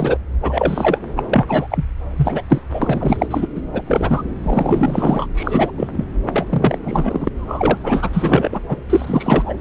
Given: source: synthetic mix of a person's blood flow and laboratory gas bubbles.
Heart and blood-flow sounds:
Doppler ultrasound of blood flow; subclavian vein
0.00-0.17 s: bubbles
0.42-1.00 s: bubbles
1.17-1.23 s: bubbles
1.30-1.84 s: bubbles
2.16-2.44 s: bubbles
2.49-2.62 s: bubbles
2.69-3.27 s: bubbles
3.30-3.47 s: bubbles
3.55-3.61 s: bubbles
3.73-3.82 s: bubbles
3.85-4.22 s: bubbles
4.43-5.27 s: bubbles
5.35-5.71 s: bubbles
5.77-5.89 s: bubbles
5.93-6.05 s: bubbles
6.32-6.46 s: bubbles
6.49-6.79 s: bubbles
6.85-7.29 s: bubbles
7.37-7.78 s: bubbles
7.83-8.10 s: bubbles
8.13-8.49 s: bubbles
8.52-8.61 s: bubbles
8.69-8.77 s: bubbles
8.89-9.54 s: bubbles
From the record:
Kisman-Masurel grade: 343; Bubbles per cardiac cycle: rolling drumbeat, 9 or more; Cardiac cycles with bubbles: 100%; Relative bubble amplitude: loud (0.450 to 0.775); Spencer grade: 3 (all of the cardiac periods contain showers or single bubble signals, but not dominating or overriding the cardiac motion signals); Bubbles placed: anywhere in the cardiac cycle

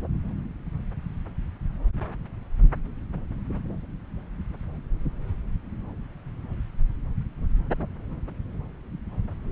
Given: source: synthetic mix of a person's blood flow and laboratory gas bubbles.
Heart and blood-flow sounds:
Doppler ultrasound of blood flow; subclavian vein
no bubbles
From the record:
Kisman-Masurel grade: 000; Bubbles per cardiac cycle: 0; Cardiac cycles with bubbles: 0%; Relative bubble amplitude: no bubbles discernible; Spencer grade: 0 (complete lack of bubble signals)

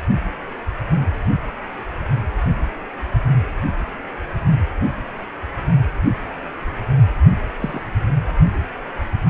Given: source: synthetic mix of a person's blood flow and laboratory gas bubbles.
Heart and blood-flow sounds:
Doppler ultrasound of blood flow; precordium
7.58-7.82 s: bubbles
From the record:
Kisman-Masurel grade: 121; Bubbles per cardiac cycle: 1 to 2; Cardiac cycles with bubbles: 10 to 50%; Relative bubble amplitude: barely perceptible (0.100 to 0.250); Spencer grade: 2 (many but less than half of the cardiac periods contain bubble signals, singularly or in groups); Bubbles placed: anywhere in the cardiac cycle

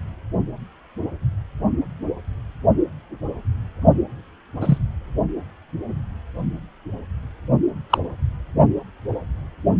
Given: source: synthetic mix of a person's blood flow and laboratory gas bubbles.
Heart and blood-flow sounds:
Doppler ultrasound of blood flow; precordium
4.61-4.78 s: bubbles
7.90-7.98 s: bubbles
From the record:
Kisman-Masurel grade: 123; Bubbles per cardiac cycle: 1 to 2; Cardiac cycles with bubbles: 10 to 50%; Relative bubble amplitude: loud (0.450 to 0.775); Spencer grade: 2 (many but less than half of the cardiac periods contain bubble signals, singularly or in groups); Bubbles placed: only in the low amplitude regions of the cardiac cycle

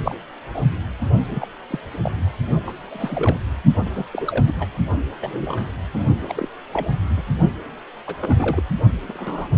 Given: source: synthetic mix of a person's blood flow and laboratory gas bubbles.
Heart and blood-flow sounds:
Doppler ultrasound of blood flow; precordium
0.04-0.15 s: bubbles
0.53-0.61 s: bubbles
1.30-1.47 s: bubbles
1.70-1.79 s: bubbles
2.03-2.12 s: bubbles
2.67-2.72 s: bubbles
2.90-3.37 s: bubbles
3.75-4.05 s: bubbles
4.12-4.53 s: bubbles
4.59-4.68 s: bubbles
5.21-5.71 s: bubbles
5.94-6.03 s: bubbles
6.21-6.49 s: bubbles
6.73-6.87 s: bubbles
7.17-7.24 s: bubbles
8.07-8.16 s: bubbles
8.20-8.63 s: bubbles
9.07-9.48 s: bubbles
From the record:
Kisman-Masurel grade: 242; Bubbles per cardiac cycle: several, 3 to 8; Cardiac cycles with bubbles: 100%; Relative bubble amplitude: moderate (0.250 to 0.450); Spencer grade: 3 (all of the cardiac periods contain showers or single bubble signals, but not dominating or overriding the cardiac motion signals); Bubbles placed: only in the low amplitude regions of the cardiac cycle

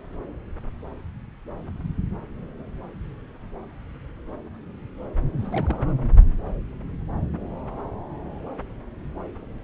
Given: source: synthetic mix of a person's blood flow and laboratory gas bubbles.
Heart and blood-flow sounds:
Doppler ultrasound of blood flow; subclavian vein
5.39-5.93 s: bubbles
From the record:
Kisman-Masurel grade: 211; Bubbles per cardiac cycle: several, 3 to 8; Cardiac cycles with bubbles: 1 to 10%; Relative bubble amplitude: barely perceptible (0.100 to 0.250); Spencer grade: 1 (occasional bubble signal discernible with the cardiac motion signal, with majority of cardiac periods free of bubbles); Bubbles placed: anywhere in the cardiac cycle

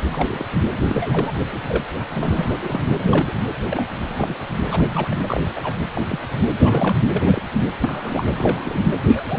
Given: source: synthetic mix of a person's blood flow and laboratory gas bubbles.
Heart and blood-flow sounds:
Doppler ultrasound of blood flow; precordium
0.10-0.45 s: bubbles
0.88-1.32 s: bubbles
1.67-1.84 s: bubbles
2.09-2.56 s: bubbles
2.61-2.81 s: bubbles
2.98-3.33 s: bubbles
3.67-3.85 s: bubbles
4.09-4.36 s: bubbles
4.69-5.17 s: bubbles
5.26-5.40 s: bubbles
5.55-5.61 s: bubbles
5.63-5.75 s: bubbles
5.94-6.19 s: bubbles
6.64-6.96 s: bubbles
7.12-7.22 s: bubbles
7.26-7.41 s: bubbles
7.53-7.62 s: bubbles
7.80-8.33 s: bubbles
8.36-8.88 s: bubbles
9.04-9.39 s: bubbles
From the record:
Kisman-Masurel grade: 242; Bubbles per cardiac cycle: several, 3 to 8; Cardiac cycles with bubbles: 100%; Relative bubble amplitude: moderate (0.250 to 0.450); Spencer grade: 3 (all of the cardiac periods contain showers or single bubble signals, but not dominating or overriding the cardiac motion signals); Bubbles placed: anywhere in the cardiac cycle

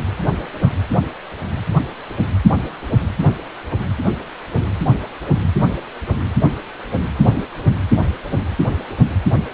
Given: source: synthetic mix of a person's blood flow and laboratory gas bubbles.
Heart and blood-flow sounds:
Doppler ultrasound of blood flow; precordium
1.73-1.80 s: bubbles
7.22-7.43 s: bubbles
From the record:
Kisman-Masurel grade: 122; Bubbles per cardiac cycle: 1 to 2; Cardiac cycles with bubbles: 10 to 50%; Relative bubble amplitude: moderate (0.250 to 0.450); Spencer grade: 2 (many but less than half of the cardiac periods contain bubble signals, singularly or in groups); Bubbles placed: anywhere in the cardiac cycle

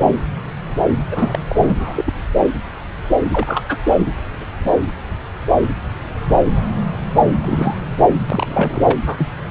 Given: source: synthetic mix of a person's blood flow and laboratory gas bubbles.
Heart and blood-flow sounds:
Doppler ultrasound of blood flow; subclavian vein
1.11-1.39 s: bubbles
1.48-2.13 s: bubbles
3.32-3.62 s: bubbles
3.68-3.78 s: bubbles
3.95-4.12 s: bubbles
7.46-7.81 s: bubbles
8.30-8.97 s: bubbles
9.06-9.29 s: bubbles
9.46-9.51 s: bubbles
From the record:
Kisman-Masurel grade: 232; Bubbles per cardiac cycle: several, 3 to 8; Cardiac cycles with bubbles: 50 to 99%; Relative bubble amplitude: moderate (0.250 to 0.450); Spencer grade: 3 (all of the cardiac periods contain showers or single bubble signals, but not dominating or overriding the cardiac motion signals); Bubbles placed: anywhere in the cardiac cycle

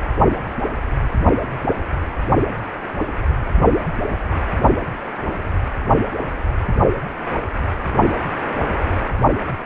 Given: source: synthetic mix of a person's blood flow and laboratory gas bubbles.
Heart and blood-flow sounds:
Doppler ultrasound of blood flow; precordium
no bubbles
From the record:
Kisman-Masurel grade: 000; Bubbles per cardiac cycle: 0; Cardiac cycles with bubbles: 0%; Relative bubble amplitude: no bubbles discernible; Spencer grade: 0 (complete lack of bubble signals)

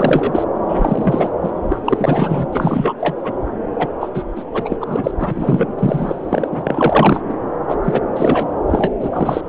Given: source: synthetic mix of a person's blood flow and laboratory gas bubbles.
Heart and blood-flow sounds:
Doppler ultrasound of blood flow; subclavian vein
0.00-0.45 s: bubbles
0.68-1.29 s: bubbles
1.43-1.52 s: bubbles
1.69-1.77 s: bubbles
1.85-2.47 s: bubbles
2.52-2.94 s: bubbles
2.98-3.33 s: bubbles
3.78-3.87 s: bubbles
4.00-4.10 s: bubbles
4.14-4.23 s: bubbles
4.35-4.43 s: bubbles
4.53-4.76 s: bubbles
4.80-5.11 s: bubbles
5.18-5.72 s: bubbles
5.77-6.50 s: bubbles
6.52-7.21 s: bubbles
7.28-7.34 s: bubbles
7.67-7.76 s: bubbles
7.84-8.01 s: bubbles
8.16-8.52 s: bubbles
8.67-8.92 s: bubbles
9.00-9.41 s: bubbles
From the record:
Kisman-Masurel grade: 343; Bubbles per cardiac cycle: rolling drumbeat, 9 or more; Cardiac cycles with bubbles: 100%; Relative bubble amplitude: loud (0.450 to 0.775); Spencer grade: 3 (all of the cardiac periods contain showers or single bubble signals, but not dominating or overriding the cardiac motion signals); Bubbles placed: anywhere in the cardiac cycle

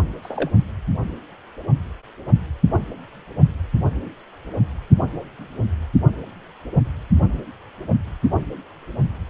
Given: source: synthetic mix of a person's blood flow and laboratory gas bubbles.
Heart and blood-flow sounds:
Doppler ultrasound of blood flow; precordium
0.23-0.50 s: bubbles
From the record:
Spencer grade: 1 (occasional bubble signal discernible with the cardiac motion signal, with majority of cardiac periods free of bubbles); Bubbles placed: only in the low amplitude regions of the cardiac cycle

